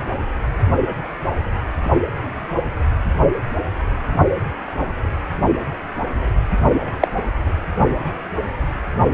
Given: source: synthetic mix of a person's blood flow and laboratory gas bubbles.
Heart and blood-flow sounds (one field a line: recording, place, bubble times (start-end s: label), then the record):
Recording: Doppler ultrasound of blood flow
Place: precordium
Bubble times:
7.00-7.08 s: bubbles
From the record:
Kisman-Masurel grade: 113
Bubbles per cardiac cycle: 1 to 2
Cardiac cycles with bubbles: 1 to 10%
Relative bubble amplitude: loud (0.450 to 0.775)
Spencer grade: 1 (occasional bubble signal discernible with the cardiac motion signal, with majority of cardiac periods free of bubbles)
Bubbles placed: only in the low amplitude regions of the cardiac cycle